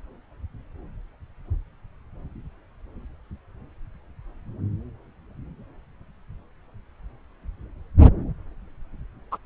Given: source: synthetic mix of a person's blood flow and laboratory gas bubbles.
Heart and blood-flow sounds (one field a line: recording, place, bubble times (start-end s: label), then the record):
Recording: Doppler ultrasound of blood flow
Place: subclavian vein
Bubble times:
9.32-9.38 s: bubbles
From the record:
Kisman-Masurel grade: 212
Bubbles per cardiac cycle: several, 3 to 8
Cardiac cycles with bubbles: 1 to 10%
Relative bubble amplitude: moderate (0.250 to 0.450)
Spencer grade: 1 (occasional bubble signal discernible with the cardiac motion signal, with majority of cardiac periods free of bubbles)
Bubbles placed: anywhere in the cardiac cycle